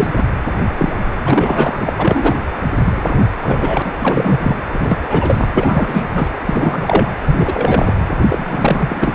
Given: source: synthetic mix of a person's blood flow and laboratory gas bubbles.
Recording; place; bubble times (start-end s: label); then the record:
Doppler ultrasound of blood flow; precordium
0.00-0.23 s: bubbles
0.77-0.98 s: bubbles
1.23-1.76 s: bubbles
1.79-1.93 s: bubbles
1.98-2.36 s: bubbles
2.84-3.17 s: bubbles
3.19-3.28 s: bubbles
3.42-3.93 s: bubbles
4.00-4.56 s: bubbles
4.72-4.98 s: bubbles
5.02-5.47 s: bubbles
5.52-6.04 s: bubbles
6.13-6.29 s: bubbles
6.46-7.12 s: bubbles
7.25-7.94 s: bubbles
8.29-9.14 s: bubbles
From the record:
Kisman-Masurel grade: 343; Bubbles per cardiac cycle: rolling drumbeat, 9 or more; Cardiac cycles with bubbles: 100%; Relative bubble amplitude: loud (0.450 to 0.775); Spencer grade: 3 (all of the cardiac periods contain showers or single bubble signals, but not dominating or overriding the cardiac motion signals); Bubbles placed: anywhere in the cardiac cycle